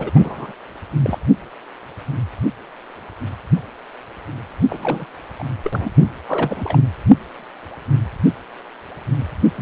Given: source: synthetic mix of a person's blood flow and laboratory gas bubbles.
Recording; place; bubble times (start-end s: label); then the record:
Doppler ultrasound of blood flow; precordium
0.00-0.11 s: bubbles
0.15-0.53 s: bubbles
1.02-1.19 s: bubbles
4.69-5.06 s: bubbles
5.39-5.44 s: bubbles
5.64-5.91 s: bubbles
6.27-6.79 s: bubbles
9.55-9.61 s: bubbles
From the record:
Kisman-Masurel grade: 332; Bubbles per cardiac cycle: rolling drumbeat, 9 or more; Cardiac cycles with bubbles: 50 to 99%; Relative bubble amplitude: moderate (0.250 to 0.450); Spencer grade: 3 (all of the cardiac periods contain showers or single bubble signals, but not dominating or overriding the cardiac motion signals); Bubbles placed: only in the low amplitude regions of the cardiac cycle